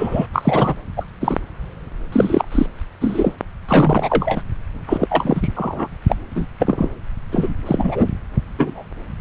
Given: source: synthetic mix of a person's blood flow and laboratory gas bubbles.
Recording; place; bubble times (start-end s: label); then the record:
Doppler ultrasound of blood flow; subclavian vein
0.00-0.27 s: bubbles
0.33-0.74 s: bubbles
0.96-1.05 s: bubbles
1.21-1.38 s: bubbles
2.12-2.44 s: bubbles
2.52-2.66 s: bubbles
3.00-3.35 s: bubbles
3.69-4.42 s: bubbles
4.87-5.07 s: bubbles
5.10-5.49 s: bubbles
5.56-5.88 s: bubbles
6.08-6.16 s: bubbles
6.35-6.47 s: bubbles
6.60-6.91 s: bubbles
7.32-7.54 s: bubbles
7.66-8.11 s: bubbles
8.58-8.84 s: bubbles
From the record:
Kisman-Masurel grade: 243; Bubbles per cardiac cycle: several, 3 to 8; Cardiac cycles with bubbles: 100%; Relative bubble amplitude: loud (0.450 to 0.775); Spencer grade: 3 (all of the cardiac periods contain showers or single bubble signals, but not dominating or overriding the cardiac motion signals); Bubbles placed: anywhere in the cardiac cycle